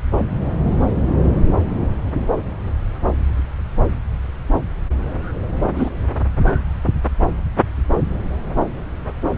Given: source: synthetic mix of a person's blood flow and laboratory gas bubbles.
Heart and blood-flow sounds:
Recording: Doppler ultrasound of blood flow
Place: subclavian vein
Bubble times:
5.75-5.89 s: bubbles
From the record:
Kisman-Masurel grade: 113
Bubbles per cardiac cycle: 1 to 2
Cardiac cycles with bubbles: 1 to 10%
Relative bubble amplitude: loud (0.450 to 0.775)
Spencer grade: 1 (occasional bubble signal discernible with the cardiac motion signal, with majority of cardiac periods free of bubbles)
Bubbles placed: anywhere in the cardiac cycle

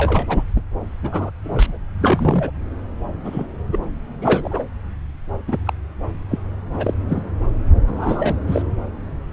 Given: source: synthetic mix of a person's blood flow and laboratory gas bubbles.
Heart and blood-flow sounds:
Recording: Doppler ultrasound of blood flow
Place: subclavian vein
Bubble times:
0.00-0.43 s: bubbles
0.56-0.61 s: bubbles
1.02-1.31 s: bubbles
1.43-1.77 s: bubbles
2.00-2.50 s: bubbles
3.25-3.45 s: bubbles
3.72-3.79 s: bubbles
4.21-4.63 s: bubbles
5.47-5.57 s: bubbles
5.66-5.73 s: bubbles
6.30-6.38 s: bubbles
6.73-6.94 s: bubbles
7.08-7.23 s: bubbles
7.87-8.36 s: bubbles
8.47-8.62 s: bubbles
From the record:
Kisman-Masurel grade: 242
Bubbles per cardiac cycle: several, 3 to 8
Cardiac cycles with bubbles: 100%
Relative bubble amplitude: moderate (0.250 to 0.450)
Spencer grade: 3 (all of the cardiac periods contain showers or single bubble signals, but not dominating or overriding the cardiac motion signals)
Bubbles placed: anywhere in the cardiac cycle

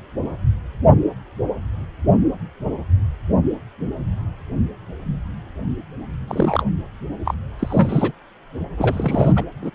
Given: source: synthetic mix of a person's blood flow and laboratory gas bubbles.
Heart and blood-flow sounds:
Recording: Doppler ultrasound of blood flow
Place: precordium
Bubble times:
6.28-6.64 s: bubbles
7.25-7.35 s: bubbles
7.59-8.12 s: bubbles
8.77-9.44 s: bubbles
9.62-9.71 s: bubbles
From the record:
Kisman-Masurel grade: 222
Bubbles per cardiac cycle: several, 3 to 8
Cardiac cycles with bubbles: 10 to 50%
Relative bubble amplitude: moderate (0.250 to 0.450)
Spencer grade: 2 (many but less than half of the cardiac periods contain bubble signals, singularly or in groups)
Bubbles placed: anywhere in the cardiac cycle

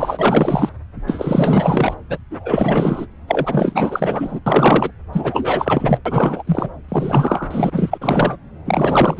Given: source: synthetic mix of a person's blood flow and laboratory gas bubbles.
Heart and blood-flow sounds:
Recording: Doppler ultrasound of blood flow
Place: subclavian vein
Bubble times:
0.00-0.70 s: bubbles
1.07-1.94 s: bubbles
2.09-2.18 s: bubbles
2.31-3.06 s: bubbles
3.27-4.39 s: bubbles
4.46-4.91 s: bubbles
5.12-5.98 s: bubbles
6.05-6.43 s: bubbles
6.46-6.70 s: bubbles
6.88-7.98 s: bubbles
8.01-8.37 s: bubbles
8.65-9.20 s: bubbles
From the record:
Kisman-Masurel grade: 444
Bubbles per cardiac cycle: continuous sound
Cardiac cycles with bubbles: 100%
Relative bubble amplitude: maximal (0.775 to 0.999)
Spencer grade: 4 (maximum detectable bubble signal sounding continuously throughout systole and diastole of every cardiac period, and overriding the amplitude of the normal cardiac signals)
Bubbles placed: anywhere in the cardiac cycle

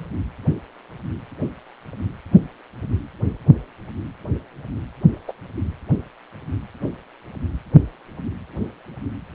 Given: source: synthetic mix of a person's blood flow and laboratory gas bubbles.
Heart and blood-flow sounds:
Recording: Doppler ultrasound of blood flow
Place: precordium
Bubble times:
5.28-5.33 s: bubbles
From the record:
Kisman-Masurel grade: 113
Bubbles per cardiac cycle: 1 to 2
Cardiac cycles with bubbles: 1 to 10%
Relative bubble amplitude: loud (0.450 to 0.775)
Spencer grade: 1 (occasional bubble signal discernible with the cardiac motion signal, with majority of cardiac periods free of bubbles)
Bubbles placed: anywhere in the cardiac cycle

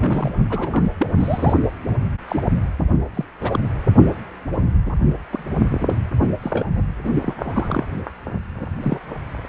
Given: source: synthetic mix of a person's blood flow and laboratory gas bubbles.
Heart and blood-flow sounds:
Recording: Doppler ultrasound of blood flow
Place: precordium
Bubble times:
0.00-0.30 s: bubbles
0.50-0.90 s: bubbles
0.99-1.07 s: bubbles
1.20-1.53 s: bubbles
2.28-2.44 s: bubbles
3.14-3.25 s: bubbles
3.40-3.60 s: bubbles
4.86-4.92 s: bubbles
5.33-5.44 s: bubbles
5.80-5.98 s: bubbles
6.42-6.65 s: bubbles
7.04-7.09 s: bubbles
7.15-7.34 s: bubbles
7.42-7.84 s: bubbles
8.81-9.01 s: bubbles
From the record:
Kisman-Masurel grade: 232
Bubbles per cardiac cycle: several, 3 to 8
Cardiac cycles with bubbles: 50 to 99%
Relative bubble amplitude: moderate (0.250 to 0.450)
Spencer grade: 3 (all of the cardiac periods contain showers or single bubble signals, but not dominating or overriding the cardiac motion signals)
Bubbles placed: only in the low amplitude regions of the cardiac cycle

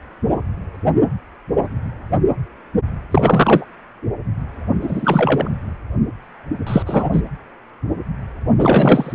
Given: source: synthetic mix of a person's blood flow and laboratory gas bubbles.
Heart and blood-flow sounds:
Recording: Doppler ultrasound of blood flow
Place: precordium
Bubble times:
3.11-3.65 s: bubbles
4.82-5.50 s: bubbles
6.67-6.83 s: bubbles
6.86-7.09 s: bubbles
7.12-7.22 s: bubbles
8.58-9.12 s: bubbles
From the record:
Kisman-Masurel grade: 223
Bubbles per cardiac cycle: several, 3 to 8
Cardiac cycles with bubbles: 10 to 50%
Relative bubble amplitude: loud (0.450 to 0.775)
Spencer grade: 2 (many but less than half of the cardiac periods contain bubble signals, singularly or in groups)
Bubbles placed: anywhere in the cardiac cycle

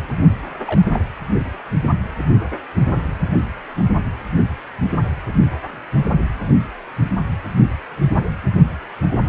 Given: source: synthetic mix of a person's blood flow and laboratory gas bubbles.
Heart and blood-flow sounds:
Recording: Doppler ultrasound of blood flow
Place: precordium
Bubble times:
0.57-0.86 s: bubbles
0.92-1.03 s: bubbles
From the record:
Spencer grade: 1 (occasional bubble signal discernible with the cardiac motion signal, with majority of cardiac periods free of bubbles)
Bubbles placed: anywhere in the cardiac cycle

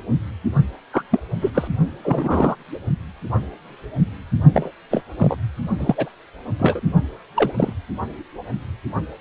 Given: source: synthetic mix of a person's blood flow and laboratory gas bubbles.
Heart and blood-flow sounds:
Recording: Doppler ultrasound of blood flow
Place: precordium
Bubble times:
0.93-1.03 s: bubbles
1.11-1.21 s: bubbles
1.41-1.51 s: bubbles
1.54-1.68 s: bubbles
2.04-2.55 s: bubbles
4.53-4.71 s: bubbles
4.91-5.03 s: bubbles
5.19-5.36 s: bubbles
5.79-6.09 s: bubbles
6.59-6.80 s: bubbles
7.36-7.53 s: bubbles
7.57-7.73 s: bubbles
From the record:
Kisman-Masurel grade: 233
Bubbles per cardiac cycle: several, 3 to 8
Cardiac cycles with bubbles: 50 to 99%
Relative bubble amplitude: loud (0.450 to 0.775)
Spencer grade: 3 (all of the cardiac periods contain showers or single bubble signals, but not dominating or overriding the cardiac motion signals)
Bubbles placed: only in the low amplitude regions of the cardiac cycle

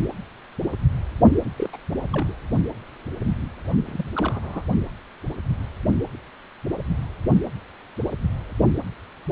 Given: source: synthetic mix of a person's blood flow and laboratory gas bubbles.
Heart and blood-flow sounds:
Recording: Doppler ultrasound of blood flow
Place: precordium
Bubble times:
1.57-1.69 s: bubbles
1.72-1.76 s: bubbles
2.12-2.33 s: bubbles
3.85-4.05 s: bubbles
4.15-4.62 s: bubbles
From the record:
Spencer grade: 2 (many but less than half of the cardiac periods contain bubble signals, singularly or in groups)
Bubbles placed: only in the low amplitude regions of the cardiac cycle

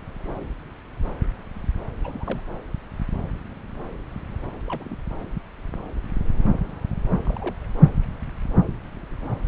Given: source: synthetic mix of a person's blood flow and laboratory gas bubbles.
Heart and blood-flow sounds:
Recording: Doppler ultrasound of blood flow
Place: subclavian vein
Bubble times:
2.04-2.41 s: bubbles
4.67-5.00 s: bubbles
5.20-5.25 s: bubbles
7.25-7.55 s: bubbles
From the record:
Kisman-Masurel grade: 221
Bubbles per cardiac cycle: several, 3 to 8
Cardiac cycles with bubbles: 10 to 50%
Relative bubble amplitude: barely perceptible (0.100 to 0.250)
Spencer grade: 2 (many but less than half of the cardiac periods contain bubble signals, singularly or in groups)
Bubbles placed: anywhere in the cardiac cycle

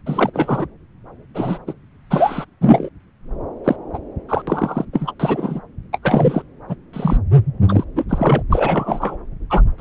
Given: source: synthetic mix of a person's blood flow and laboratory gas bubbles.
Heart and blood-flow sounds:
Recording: Doppler ultrasound of blood flow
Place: subclavian vein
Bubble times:
0.06-0.30 s: bubbles
0.33-0.66 s: bubbles
1.34-1.58 s: bubbles
1.66-1.73 s: bubbles
2.10-2.46 s: bubbles
2.61-2.89 s: bubbles
3.64-3.76 s: bubbles
3.94-3.98 s: bubbles
4.29-4.43 s: bubbles
4.47-4.85 s: bubbles
4.93-5.12 s: bubbles
5.20-5.61 s: bubbles
5.93-5.98 s: bubbles
6.03-6.42 s: bubbles
6.68-6.76 s: bubbles
6.93-7.17 s: bubbles
7.69-7.85 s: bubbles
7.96-8.05 s: bubbles
8.09-8.43 s: bubbles
8.52-9.17 s: bubbles
9.50-9.62 s: bubbles
9.78-9.81 s: bubbles
From the record:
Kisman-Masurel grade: 243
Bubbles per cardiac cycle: several, 3 to 8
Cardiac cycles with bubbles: 100%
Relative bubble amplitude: loud (0.450 to 0.775)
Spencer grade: 3 (all of the cardiac periods contain showers or single bubble signals, but not dominating or overriding the cardiac motion signals)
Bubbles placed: anywhere in the cardiac cycle

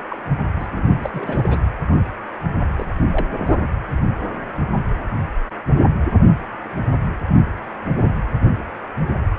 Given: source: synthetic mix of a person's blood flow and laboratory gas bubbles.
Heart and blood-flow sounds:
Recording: Doppler ultrasound of blood flow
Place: precordium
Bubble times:
0.09-0.22 s: bubbles
0.59-0.66 s: bubbles
0.71-1.10 s: bubbles
1.14-1.61 s: bubbles
2.77-3.06 s: bubbles
3.11-3.27 s: bubbles
3.45-3.57 s: bubbles
From the record:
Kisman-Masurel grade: 222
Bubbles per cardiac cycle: several, 3 to 8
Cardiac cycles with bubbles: 10 to 50%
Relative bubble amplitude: moderate (0.250 to 0.450)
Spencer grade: 2 (many but less than half of the cardiac periods contain bubble signals, singularly or in groups)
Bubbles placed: anywhere in the cardiac cycle

